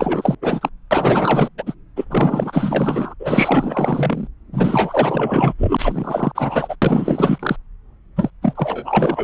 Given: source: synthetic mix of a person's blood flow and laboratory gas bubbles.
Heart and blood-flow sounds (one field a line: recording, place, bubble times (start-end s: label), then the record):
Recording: Doppler ultrasound of blood flow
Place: subclavian vein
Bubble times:
0.00-0.35 s: bubbles
0.41-0.69 s: bubbles
0.91-1.49 s: bubbles
1.57-1.63 s: bubbles
1.66-1.75 s: bubbles
1.96-2.05 s: bubbles
2.09-3.14 s: bubbles
3.19-4.28 s: bubbles
4.52-5.54 s: bubbles
5.58-6.32 s: bubbles
6.35-6.75 s: bubbles
6.81-7.56 s: bubbles
8.16-8.30 s: bubbles
8.42-9.24 s: bubbles
From the record:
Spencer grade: 4 (maximum detectable bubble signal sounding continuously throughout systole and diastole of every cardiac period, and overriding the amplitude of the normal cardiac signals)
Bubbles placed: anywhere in the cardiac cycle